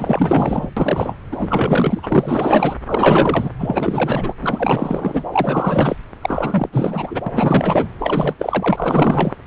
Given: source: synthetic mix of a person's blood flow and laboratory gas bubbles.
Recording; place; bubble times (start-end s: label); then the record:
Doppler ultrasound of blood flow; subclavian vein
0.00-0.69 s: bubbles
0.77-1.17 s: bubbles
1.31-2.78 s: bubbles
2.85-3.50 s: bubbles
3.58-4.33 s: bubbles
4.41-5.23 s: bubbles
5.32-5.96 s: bubbles
6.21-6.69 s: bubbles
6.72-7.20 s: bubbles
7.26-7.89 s: bubbles
7.99-8.34 s: bubbles
8.38-9.39 s: bubbles
From the record:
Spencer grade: 4 (maximum detectable bubble signal sounding continuously throughout systole and diastole of every cardiac period, and overriding the amplitude of the normal cardiac signals); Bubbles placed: anywhere in the cardiac cycle